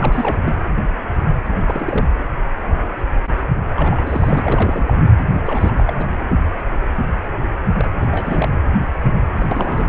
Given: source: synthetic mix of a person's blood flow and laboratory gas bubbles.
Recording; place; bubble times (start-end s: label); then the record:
Doppler ultrasound of blood flow; precordium
0.00-0.52 s: bubbles
1.66-2.09 s: bubbles
3.69-4.94 s: bubbles
5.40-5.84 s: bubbles
5.87-6.19 s: bubbles
6.29-6.36 s: bubbles
7.77-8.48 s: bubbles
9.39-9.89 s: bubbles
From the record:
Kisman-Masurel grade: 332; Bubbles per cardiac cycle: rolling drumbeat, 9 or more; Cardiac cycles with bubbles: 50 to 99%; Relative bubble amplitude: moderate (0.250 to 0.450); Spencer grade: 3 (all of the cardiac periods contain showers or single bubble signals, but not dominating or overriding the cardiac motion signals); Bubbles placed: anywhere in the cardiac cycle